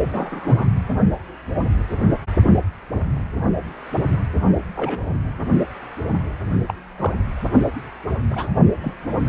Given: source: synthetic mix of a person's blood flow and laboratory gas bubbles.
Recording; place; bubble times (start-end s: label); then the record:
Doppler ultrasound of blood flow; precordium
0.05-0.65 s: bubbles
4.76-4.99 s: bubbles
6.68-6.73 s: bubbles
6.98-7.13 s: bubbles
8.30-8.47 s: bubbles
8.81-8.94 s: bubbles
From the record:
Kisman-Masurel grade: 122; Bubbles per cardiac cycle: 1 to 2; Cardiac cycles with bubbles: 10 to 50%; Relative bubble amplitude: moderate (0.250 to 0.450); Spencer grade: 2 (many but less than half of the cardiac periods contain bubble signals, singularly or in groups); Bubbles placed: anywhere in the cardiac cycle